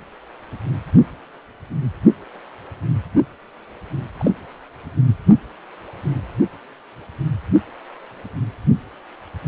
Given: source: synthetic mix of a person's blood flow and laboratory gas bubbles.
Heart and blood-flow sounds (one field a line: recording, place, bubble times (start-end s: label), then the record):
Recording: Doppler ultrasound of blood flow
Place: precordium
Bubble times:
4.17-4.31 s: bubbles
From the record:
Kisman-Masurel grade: 112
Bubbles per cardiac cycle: 1 to 2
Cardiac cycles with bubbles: 1 to 10%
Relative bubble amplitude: moderate (0.250 to 0.450)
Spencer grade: 1 (occasional bubble signal discernible with the cardiac motion signal, with majority of cardiac periods free of bubbles)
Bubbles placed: only in the low amplitude regions of the cardiac cycle